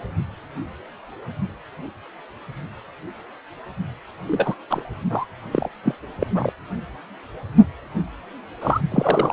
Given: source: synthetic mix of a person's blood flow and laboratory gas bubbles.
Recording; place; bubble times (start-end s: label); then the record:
Doppler ultrasound of blood flow; precordium
4.28-4.54 s: bubbles
4.70-4.83 s: bubbles
5.10-5.25 s: bubbles
5.53-5.68 s: bubbles
5.83-5.95 s: bubbles
6.20-6.27 s: bubbles
6.34-6.53 s: bubbles
8.61-8.81 s: bubbles
8.91-9.32 s: bubbles
From the record:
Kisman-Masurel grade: 222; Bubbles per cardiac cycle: several, 3 to 8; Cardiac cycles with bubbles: 10 to 50%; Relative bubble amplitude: moderate (0.250 to 0.450); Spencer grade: 2 (many but less than half of the cardiac periods contain bubble signals, singularly or in groups); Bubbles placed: anywhere in the cardiac cycle